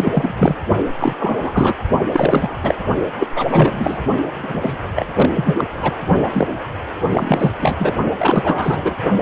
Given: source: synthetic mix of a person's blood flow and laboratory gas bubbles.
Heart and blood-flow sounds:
Doppler ultrasound of blood flow; precordium
0.00-0.35 s: bubbles
0.38-0.55 s: bubbles
0.98-1.13 s: bubbles
1.19-1.75 s: bubbles
2.12-2.51 s: bubbles
2.62-2.75 s: bubbles
3.19-3.27 s: bubbles
3.35-4.03 s: bubbles
4.38-4.77 s: bubbles
4.96-5.06 s: bubbles
5.15-5.29 s: bubbles
5.34-5.54 s: bubbles
5.58-5.64 s: bubbles
5.73-5.96 s: bubbles
6.30-6.47 s: bubbles
7.12-7.52 s: bubbles
7.59-7.76 s: bubbles
7.78-7.96 s: bubbles
8.18-8.95 s: bubbles
From the record:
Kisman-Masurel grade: 333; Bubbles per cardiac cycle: rolling drumbeat, 9 or more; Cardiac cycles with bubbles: 50 to 99%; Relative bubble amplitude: loud (0.450 to 0.775); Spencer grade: 3 (all of the cardiac periods contain showers or single bubble signals, but not dominating or overriding the cardiac motion signals); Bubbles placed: only in the low amplitude regions of the cardiac cycle

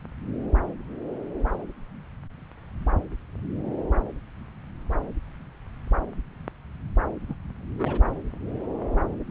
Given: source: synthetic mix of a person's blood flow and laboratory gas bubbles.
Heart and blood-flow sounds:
Doppler ultrasound of blood flow; subclavian vein
7.28-7.33 s: bubbles
7.78-8.00 s: bubbles
From the record:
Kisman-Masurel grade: 221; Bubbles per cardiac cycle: several, 3 to 8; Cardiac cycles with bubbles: 10 to 50%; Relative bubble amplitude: barely perceptible (0.100 to 0.250); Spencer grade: 2 (many but less than half of the cardiac periods contain bubble signals, singularly or in groups); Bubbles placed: anywhere in the cardiac cycle

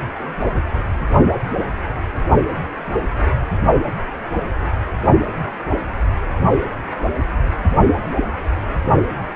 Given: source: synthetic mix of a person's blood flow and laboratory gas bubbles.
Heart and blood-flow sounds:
Doppler ultrasound of blood flow; precordium
1.60-1.65 s: bubbles
From the record:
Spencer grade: 1 (occasional bubble signal discernible with the cardiac motion signal, with majority of cardiac periods free of bubbles); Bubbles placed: only in the low amplitude regions of the cardiac cycle

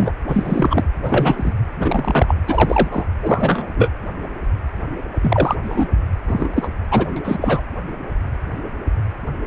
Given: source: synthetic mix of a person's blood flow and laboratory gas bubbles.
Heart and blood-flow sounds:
Doppler ultrasound of blood flow; precordium
0.00-0.11 s: bubbles
0.28-0.83 s: bubbles
1.02-1.54 s: bubbles
1.80-2.35 s: bubbles
2.47-2.88 s: bubbles
2.91-3.05 s: bubbles
3.22-3.67 s: bubbles
3.76-3.91 s: bubbles
5.21-5.55 s: bubbles
5.63-5.87 s: bubbles
6.27-6.49 s: bubbles
6.53-6.68 s: bubbles
6.91-7.13 s: bubbles
7.16-7.21 s: bubbles
7.24-7.38 s: bubbles
7.41-7.62 s: bubbles
From the record:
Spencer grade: 3 (all of the cardiac periods contain showers or single bubble signals, but not dominating or overriding the cardiac motion signals); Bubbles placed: anywhere in the cardiac cycle

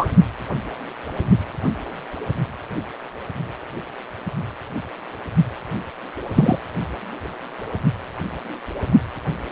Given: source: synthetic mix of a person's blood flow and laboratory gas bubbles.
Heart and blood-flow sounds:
Doppler ultrasound of blood flow; precordium
0.00-0.07 s: bubbles
6.35-6.59 s: bubbles
From the record:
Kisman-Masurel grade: 123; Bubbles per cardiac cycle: 1 to 2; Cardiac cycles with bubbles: 10 to 50%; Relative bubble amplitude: loud (0.450 to 0.775); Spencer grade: 2 (many but less than half of the cardiac periods contain bubble signals, singularly or in groups); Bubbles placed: only in the low amplitude regions of the cardiac cycle

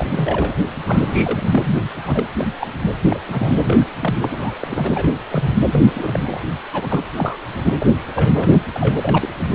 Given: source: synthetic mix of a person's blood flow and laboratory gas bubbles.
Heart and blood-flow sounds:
Doppler ultrasound of blood flow; precordium
0.00-0.07 s: bubbles
0.10-0.54 s: bubbles
0.86-1.81 s: bubbles
2.06-2.24 s: bubbles
2.39-2.47 s: bubbles
2.60-2.67 s: bubbles
2.82-2.90 s: bubbles
3.02-3.20 s: bubbles
3.29-3.91 s: bubbles
4.00-4.13 s: bubbles
4.17-4.52 s: bubbles
4.61-5.08 s: bubbles
5.31-5.58 s: bubbles
5.71-5.79 s: bubbles
5.85-6.40 s: bubbles
6.73-7.04 s: bubbles
7.17-7.38 s: bubbles
7.64-7.74 s: bubbles
7.80-7.86 s: bubbles
8.13-8.49 s: bubbles
8.52-8.58 s: bubbles
8.74-8.98 s: bubbles
9.01-9.18 s: bubbles
9.21-9.29 s: bubbles
9.38-9.55 s: bubbles
From the record:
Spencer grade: 3 (all of the cardiac periods contain showers or single bubble signals, but not dominating or overriding the cardiac motion signals); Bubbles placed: anywhere in the cardiac cycle

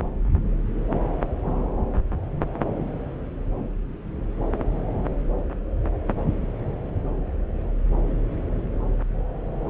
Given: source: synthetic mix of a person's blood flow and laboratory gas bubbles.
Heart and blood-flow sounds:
Doppler ultrasound of blood flow; subclavian vein
no bubbles
From the record:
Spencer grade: 0 (complete lack of bubble signals)

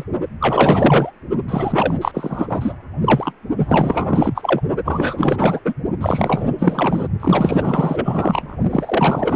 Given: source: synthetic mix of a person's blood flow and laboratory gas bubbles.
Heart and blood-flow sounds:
Doppler ultrasound of blood flow; precordium
0.00-0.04 s: bubbles
0.40-1.11 s: bubbles
1.48-1.94 s: bubbles
2.01-2.73 s: bubbles
3.00-3.33 s: bubbles
3.57-4.61 s: bubbles
4.84-5.60 s: bubbles
5.65-5.74 s: bubbles
6.00-7.08 s: bubbles
7.20-8.57 s: bubbles
8.69-9.36 s: bubbles
From the record:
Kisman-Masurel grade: 444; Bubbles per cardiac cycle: continuous sound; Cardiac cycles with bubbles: 100%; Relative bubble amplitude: maximal (0.775 to 0.999); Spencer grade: 4 (maximum detectable bubble signal sounding continuously throughout systole and diastole of every cardiac period, and overriding the amplitude of the normal cardiac signals); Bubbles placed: only in the low amplitude regions of the cardiac cycle

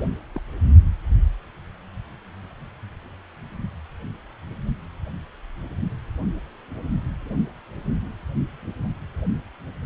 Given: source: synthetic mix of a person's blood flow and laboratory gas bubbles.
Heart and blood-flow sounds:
Doppler ultrasound of blood flow; precordium
0.35-0.42 s: bubbles
From the record:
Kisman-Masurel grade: 211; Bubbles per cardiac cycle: several, 3 to 8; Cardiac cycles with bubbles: 1 to 10%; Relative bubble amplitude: barely perceptible (0.100 to 0.250); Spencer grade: 1 (occasional bubble signal discernible with the cardiac motion signal, with majority of cardiac periods free of bubbles); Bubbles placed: only in the low amplitude regions of the cardiac cycle

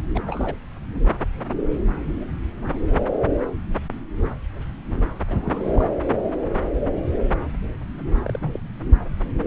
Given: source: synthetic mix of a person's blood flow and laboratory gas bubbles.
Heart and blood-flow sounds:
Doppler ultrasound of blood flow; subclavian vein
0.14-0.21 s: bubbles
0.27-0.56 s: bubbles
5.29-5.89 s: bubbles
8.00-8.72 s: bubbles
From the record:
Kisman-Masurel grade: 221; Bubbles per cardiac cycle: several, 3 to 8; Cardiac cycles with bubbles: 10 to 50%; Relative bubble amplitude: barely perceptible (0.100 to 0.250); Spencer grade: 2 (many but less than half of the cardiac periods contain bubble signals, singularly or in groups); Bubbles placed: anywhere in the cardiac cycle

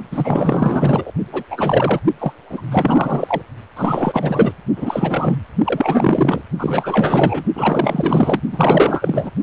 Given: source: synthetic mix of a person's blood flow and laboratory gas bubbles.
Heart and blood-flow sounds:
Doppler ultrasound of blood flow; precordium
0.11-1.12 s: bubbles
1.32-1.44 s: bubbles
1.50-2.00 s: bubbles
2.20-2.32 s: bubbles
2.50-2.61 s: bubbles
2.71-3.42 s: bubbles
3.76-4.52 s: bubbles
4.76-5.38 s: bubbles
5.64-6.42 s: bubbles
6.58-7.44 s: bubbles
7.55-8.42 s: bubbles
8.52-9.30 s: bubbles
From the record:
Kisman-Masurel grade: 444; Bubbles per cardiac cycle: continuous sound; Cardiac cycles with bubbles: 100%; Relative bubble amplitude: maximal (0.775 to 0.999); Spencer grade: 4 (maximum detectable bubble signal sounding continuously throughout systole and diastole of every cardiac period, and overriding the amplitude of the normal cardiac signals); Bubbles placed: only in the low amplitude regions of the cardiac cycle

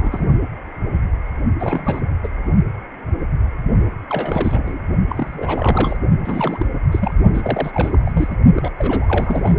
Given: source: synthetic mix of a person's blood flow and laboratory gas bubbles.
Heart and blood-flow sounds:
Doppler ultrasound of blood flow; precordium
0.00-0.27 s: bubbles
1.59-2.00 s: bubbles
2.23-2.28 s: bubbles
4.09-4.81 s: bubbles
5.09-5.96 s: bubbles
6.25-6.66 s: bubbles
6.92-7.14 s: bubbles
7.33-8.12 s: bubbles
8.14-8.28 s: bubbles
8.30-8.36 s: bubbles
8.56-8.72 s: bubbles
8.78-9.59 s: bubbles
From the record:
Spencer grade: 3 (all of the cardiac periods contain showers or single bubble signals, but not dominating or overriding the cardiac motion signals); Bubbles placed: only in the low amplitude regions of the cardiac cycle

